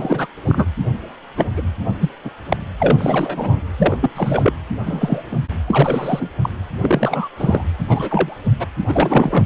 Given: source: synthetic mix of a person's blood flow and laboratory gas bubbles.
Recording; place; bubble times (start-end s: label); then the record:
Doppler ultrasound of blood flow; precordium
0.00-0.27 s: bubbles
0.46-0.66 s: bubbles
1.36-1.46 s: bubbles
1.56-1.61 s: bubbles
2.00-2.09 s: bubbles
2.25-2.31 s: bubbles
2.48-2.56 s: bubbles
2.79-3.60 s: bubbles
3.78-3.97 s: bubbles
4.00-4.10 s: bubbles
4.15-4.53 s: bubbles
4.86-5.24 s: bubbles
5.30-5.39 s: bubbles
5.67-6.28 s: bubbles
6.42-6.50 s: bubbles
6.79-7.29 s: bubbles
7.37-7.63 s: bubbles
7.88-8.36 s: bubbles
8.59-8.67 s: bubbles
8.88-9.46 s: bubbles
From the record:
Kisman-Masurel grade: 243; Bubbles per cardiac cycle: several, 3 to 8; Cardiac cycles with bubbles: 100%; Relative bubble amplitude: loud (0.450 to 0.775); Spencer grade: 3 (all of the cardiac periods contain showers or single bubble signals, but not dominating or overriding the cardiac motion signals); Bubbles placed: anywhere in the cardiac cycle